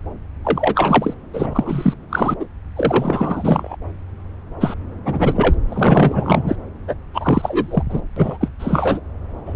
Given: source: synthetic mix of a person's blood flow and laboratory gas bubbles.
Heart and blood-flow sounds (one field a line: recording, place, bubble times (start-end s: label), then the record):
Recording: Doppler ultrasound of blood flow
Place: subclavian vein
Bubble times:
0.44-1.14 s: bubbles
1.33-1.94 s: bubbles
2.09-2.37 s: bubbles
2.39-2.45 s: bubbles
2.75-3.77 s: bubbles
4.60-4.75 s: bubbles
5.04-5.58 s: bubbles
5.69-6.55 s: bubbles
6.88-6.96 s: bubbles
7.13-7.83 s: bubbles
7.89-8.01 s: bubbles
8.16-8.38 s: bubbles
8.40-8.48 s: bubbles
8.59-9.00 s: bubbles
9.46-9.56 s: bubbles
From the record:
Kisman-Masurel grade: 333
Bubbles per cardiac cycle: rolling drumbeat, 9 or more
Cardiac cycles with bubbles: 50 to 99%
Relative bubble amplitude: loud (0.450 to 0.775)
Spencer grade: 3 (all of the cardiac periods contain showers or single bubble signals, but not dominating or overriding the cardiac motion signals)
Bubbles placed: anywhere in the cardiac cycle